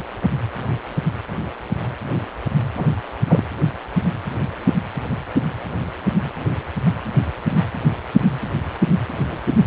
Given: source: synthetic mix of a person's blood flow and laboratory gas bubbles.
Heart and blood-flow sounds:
Doppler ultrasound of blood flow; precordium
2.77-2.85 s: bubbles
3.29-3.46 s: bubbles
9.28-9.40 s: bubbles
From the record:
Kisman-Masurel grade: 122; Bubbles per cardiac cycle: 1 to 2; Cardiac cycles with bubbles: 10 to 50%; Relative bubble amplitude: moderate (0.250 to 0.450); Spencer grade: 2 (many but less than half of the cardiac periods contain bubble signals, singularly or in groups); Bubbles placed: anywhere in the cardiac cycle

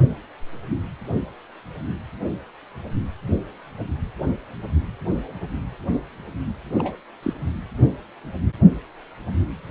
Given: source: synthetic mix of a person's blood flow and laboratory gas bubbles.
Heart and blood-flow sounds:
Doppler ultrasound of blood flow; precordium
6.69-6.96 s: bubbles
7.23-7.33 s: bubbles
From the record:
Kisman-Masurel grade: 211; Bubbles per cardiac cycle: several, 3 to 8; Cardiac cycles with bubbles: 1 to 10%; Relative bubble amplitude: barely perceptible (0.100 to 0.250); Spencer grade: 1 (occasional bubble signal discernible with the cardiac motion signal, with majority of cardiac periods free of bubbles); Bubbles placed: anywhere in the cardiac cycle

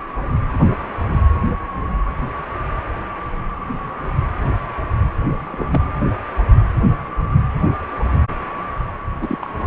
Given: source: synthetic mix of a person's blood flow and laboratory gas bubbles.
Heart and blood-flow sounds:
Doppler ultrasound of blood flow; precordium
5.45-5.64 s: bubbles
5.72-5.80 s: bubbles
9.21-9.38 s: bubbles
9.41-9.67 s: bubbles
From the record:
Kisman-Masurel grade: 222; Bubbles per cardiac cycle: several, 3 to 8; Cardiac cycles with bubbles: 10 to 50%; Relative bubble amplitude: moderate (0.250 to 0.450); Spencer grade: 2 (many but less than half of the cardiac periods contain bubble signals, singularly or in groups); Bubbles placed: anywhere in the cardiac cycle

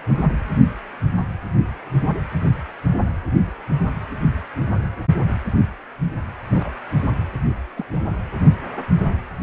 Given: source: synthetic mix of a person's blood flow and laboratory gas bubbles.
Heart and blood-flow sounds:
Doppler ultrasound of blood flow; precordium
6.50-6.69 s: bubbles
6.98-7.07 s: bubbles
7.76-7.85 s: bubbles
7.92-8.00 s: bubbles
From the record:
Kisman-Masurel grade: 121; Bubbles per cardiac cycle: 1 to 2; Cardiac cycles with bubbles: 10 to 50%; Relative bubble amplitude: barely perceptible (0.100 to 0.250); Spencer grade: 2 (many but less than half of the cardiac periods contain bubble signals, singularly or in groups); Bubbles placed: anywhere in the cardiac cycle

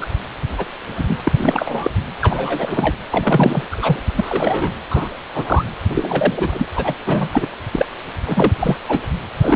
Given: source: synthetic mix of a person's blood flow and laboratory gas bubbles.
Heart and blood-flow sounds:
Doppler ultrasound of blood flow; precordium
0.01-0.08 s: bubbles
0.57-0.65 s: bubbles
0.95-1.18 s: bubbles
1.25-1.32 s: bubbles
1.37-1.91 s: bubbles
2.21-2.96 s: bubbles
3.10-3.62 s: bubbles
3.71-4.02 s: bubbles
4.16-4.72 s: bubbles
4.90-5.10 s: bubbles
5.34-5.65 s: bubbles
5.90-6.66 s: bubbles
6.76-6.95 s: bubbles
7.05-7.29 s: bubbles
7.33-7.48 s: bubbles
7.72-7.86 s: bubbles
8.26-8.51 s: bubbles
8.59-8.76 s: bubbles
8.88-9.00 s: bubbles
9.40-9.56 s: bubbles
From the record:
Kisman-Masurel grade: 242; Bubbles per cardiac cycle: several, 3 to 8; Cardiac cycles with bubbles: 100%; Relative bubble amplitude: moderate (0.250 to 0.450); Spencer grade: 3 (all of the cardiac periods contain showers or single bubble signals, but not dominating or overriding the cardiac motion signals); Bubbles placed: anywhere in the cardiac cycle

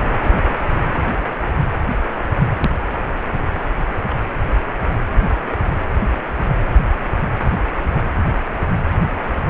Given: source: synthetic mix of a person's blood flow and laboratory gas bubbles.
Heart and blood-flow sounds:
Doppler ultrasound of blood flow; precordium
4.10-4.15 s: bubbles
From the record:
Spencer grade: 1 (occasional bubble signal discernible with the cardiac motion signal, with majority of cardiac periods free of bubbles); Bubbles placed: anywhere in the cardiac cycle

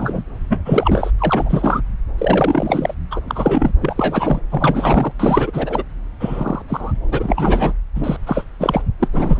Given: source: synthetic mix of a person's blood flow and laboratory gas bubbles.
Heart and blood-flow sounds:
Doppler ultrasound of blood flow; subclavian vein
0.00-0.24 s: bubbles
0.49-0.62 s: bubbles
0.65-1.10 s: bubbles
1.18-1.81 s: bubbles
2.18-2.94 s: bubbles
3.10-3.20 s: bubbles
3.27-3.73 s: bubbles
3.81-4.40 s: bubbles
4.50-5.12 s: bubbles
5.19-5.50 s: bubbles
5.53-5.83 s: bubbles
6.20-6.62 s: bubbles
6.67-6.92 s: bubbles
7.08-7.74 s: bubbles
7.95-8.16 s: bubbles
8.26-8.44 s: bubbles
8.59-8.82 s: bubbles
8.99-9.08 s: bubbles
9.13-9.40 s: bubbles
From the record:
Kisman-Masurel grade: 343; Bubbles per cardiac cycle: rolling drumbeat, 9 or more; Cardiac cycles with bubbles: 100%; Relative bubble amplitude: loud (0.450 to 0.775); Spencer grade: 3 (all of the cardiac periods contain showers or single bubble signals, but not dominating or overriding the cardiac motion signals); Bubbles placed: anywhere in the cardiac cycle

